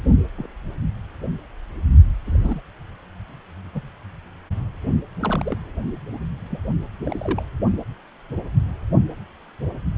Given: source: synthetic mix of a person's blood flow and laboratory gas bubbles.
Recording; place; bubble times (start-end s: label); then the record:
Doppler ultrasound of blood flow; precordium
0.37-0.47 s: bubbles
2.25-2.61 s: bubbles
3.75-3.81 s: bubbles
5.20-5.58 s: bubbles
6.50-6.60 s: bubbles
7.04-7.42 s: bubbles
From the record:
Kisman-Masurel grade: 121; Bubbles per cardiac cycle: 1 to 2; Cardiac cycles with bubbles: 10 to 50%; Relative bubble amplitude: barely perceptible (0.100 to 0.250); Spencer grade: 2 (many but less than half of the cardiac periods contain bubble signals, singularly or in groups); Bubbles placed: only in the low amplitude regions of the cardiac cycle